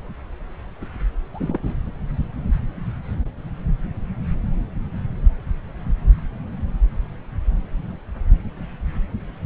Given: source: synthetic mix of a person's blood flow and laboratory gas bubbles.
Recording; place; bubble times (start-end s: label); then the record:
Doppler ultrasound of blood flow; subclavian vein
1.33-1.78 s: bubbles
From the record:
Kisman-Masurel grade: 211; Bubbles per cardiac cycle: several, 3 to 8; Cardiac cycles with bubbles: 1 to 10%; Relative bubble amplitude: barely perceptible (0.100 to 0.250); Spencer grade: 1 (occasional bubble signal discernible with the cardiac motion signal, with majority of cardiac periods free of bubbles); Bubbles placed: anywhere in the cardiac cycle